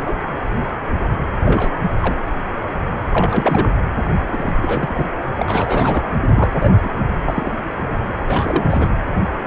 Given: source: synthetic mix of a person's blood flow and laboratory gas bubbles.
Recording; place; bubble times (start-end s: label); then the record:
Doppler ultrasound of blood flow; precordium
0.00-0.15 s: bubbles
1.44-1.83 s: bubbles
2.02-2.16 s: bubbles
3.11-3.82 s: bubbles
4.32-4.54 s: bubbles
4.61-5.06 s: bubbles
5.38-6.05 s: bubbles
6.33-6.51 s: bubbles
6.60-6.71 s: bubbles
6.82-6.94 s: bubbles
7.26-7.52 s: bubbles
8.28-8.91 s: bubbles
From the record:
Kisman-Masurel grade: 222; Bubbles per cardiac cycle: several, 3 to 8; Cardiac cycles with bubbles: 10 to 50%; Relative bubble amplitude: moderate (0.250 to 0.450); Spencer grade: 2 (many but less than half of the cardiac periods contain bubble signals, singularly or in groups); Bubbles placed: anywhere in the cardiac cycle